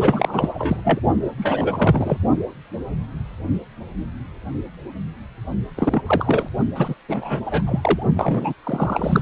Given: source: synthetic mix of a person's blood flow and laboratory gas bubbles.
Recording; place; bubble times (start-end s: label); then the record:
Doppler ultrasound of blood flow; precordium
0.00-0.50 s: bubbles
0.54-0.81 s: bubbles
0.84-1.00 s: bubbles
1.38-2.17 s: bubbles
5.76-6.02 s: bubbles
6.06-6.48 s: bubbles
6.75-6.95 s: bubbles
7.08-7.40 s: bubbles
7.46-7.63 s: bubbles
7.66-8.05 s: bubbles
8.16-8.54 s: bubbles
8.63-9.22 s: bubbles
From the record:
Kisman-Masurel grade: 332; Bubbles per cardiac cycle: rolling drumbeat, 9 or more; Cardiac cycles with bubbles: 50 to 99%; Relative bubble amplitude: moderate (0.250 to 0.450); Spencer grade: 3 (all of the cardiac periods contain showers or single bubble signals, but not dominating or overriding the cardiac motion signals); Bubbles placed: only in the low amplitude regions of the cardiac cycle